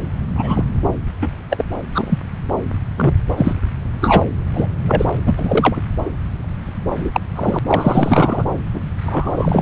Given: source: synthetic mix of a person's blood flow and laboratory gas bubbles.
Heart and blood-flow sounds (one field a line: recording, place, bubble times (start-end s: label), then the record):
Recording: Doppler ultrasound of blood flow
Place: subclavian vein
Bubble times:
0.35-0.65 s: bubbles
1.21-1.29 s: bubbles
1.50-1.65 s: bubbles
1.90-2.20 s: bubbles
2.96-3.14 s: bubbles
3.37-3.56 s: bubbles
4.00-4.25 s: bubbles
4.54-4.67 s: bubbles
4.88-5.05 s: bubbles
5.26-5.33 s: bubbles
5.37-5.81 s: bubbles
6.04-6.10 s: bubbles
6.96-7.20 s: bubbles
7.36-7.59 s: bubbles
7.67-8.44 s: bubbles
8.73-8.81 s: bubbles
9.04-9.62 s: bubbles
From the record:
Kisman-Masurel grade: 233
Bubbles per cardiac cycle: several, 3 to 8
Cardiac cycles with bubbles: 50 to 99%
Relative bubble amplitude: loud (0.450 to 0.775)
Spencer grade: 3 (all of the cardiac periods contain showers or single bubble signals, but not dominating or overriding the cardiac motion signals)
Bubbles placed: anywhere in the cardiac cycle